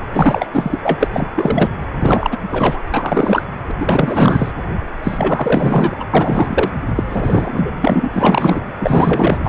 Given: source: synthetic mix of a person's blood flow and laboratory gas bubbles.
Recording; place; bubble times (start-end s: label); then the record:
Doppler ultrasound of blood flow; precordium
0.13-0.47 s: bubbles
0.53-0.79 s: bubbles
0.82-1.09 s: bubbles
1.13-1.31 s: bubbles
1.35-1.70 s: bubbles
1.95-2.37 s: bubbles
2.52-2.78 s: bubbles
2.92-3.46 s: bubbles
3.68-3.72 s: bubbles
3.80-4.51 s: bubbles
5.03-5.96 s: bubbles
5.99-6.04 s: bubbles
6.13-6.71 s: bubbles
6.95-7.71 s: bubbles
7.80-8.10 s: bubbles
8.13-8.62 s: bubbles
8.79-9.40 s: bubbles
9.44-9.49 s: bubbles
From the record:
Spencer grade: 4 (maximum detectable bubble signal sounding continuously throughout systole and diastole of every cardiac period, and overriding the amplitude of the normal cardiac signals); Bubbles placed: anywhere in the cardiac cycle